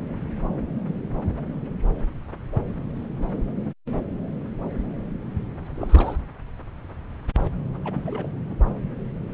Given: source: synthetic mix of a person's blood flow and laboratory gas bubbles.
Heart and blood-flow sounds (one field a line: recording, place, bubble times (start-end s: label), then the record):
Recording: Doppler ultrasound of blood flow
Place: subclavian vein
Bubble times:
5.75-6.16 s: bubbles
7.84-8.31 s: bubbles
8.44-8.55 s: bubbles
From the record:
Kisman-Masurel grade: 221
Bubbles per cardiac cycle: several, 3 to 8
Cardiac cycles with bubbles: 10 to 50%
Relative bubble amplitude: barely perceptible (0.100 to 0.250)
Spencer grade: 2 (many but less than half of the cardiac periods contain bubble signals, singularly or in groups)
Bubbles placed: anywhere in the cardiac cycle